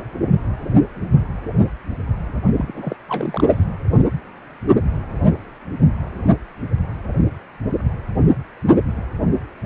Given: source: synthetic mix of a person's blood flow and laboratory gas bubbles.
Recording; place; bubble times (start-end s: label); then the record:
Doppler ultrasound of blood flow; precordium
2.57-2.96 s: bubbles
3.08-3.64 s: bubbles
From the record:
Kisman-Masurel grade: 221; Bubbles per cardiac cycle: several, 3 to 8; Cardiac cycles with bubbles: 10 to 50%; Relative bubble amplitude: barely perceptible (0.100 to 0.250); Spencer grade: 2 (many but less than half of the cardiac periods contain bubble signals, singularly or in groups); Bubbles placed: anywhere in the cardiac cycle